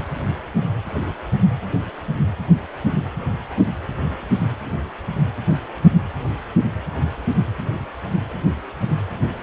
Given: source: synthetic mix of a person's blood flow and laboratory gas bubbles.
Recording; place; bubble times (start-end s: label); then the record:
Doppler ultrasound of blood flow; precordium
8.84-8.95 s: bubbles
From the record:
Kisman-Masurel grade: 111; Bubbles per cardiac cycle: 1 to 2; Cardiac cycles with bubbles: 1 to 10%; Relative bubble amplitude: barely perceptible (0.100 to 0.250); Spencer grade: 1 (occasional bubble signal discernible with the cardiac motion signal, with majority of cardiac periods free of bubbles); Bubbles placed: anywhere in the cardiac cycle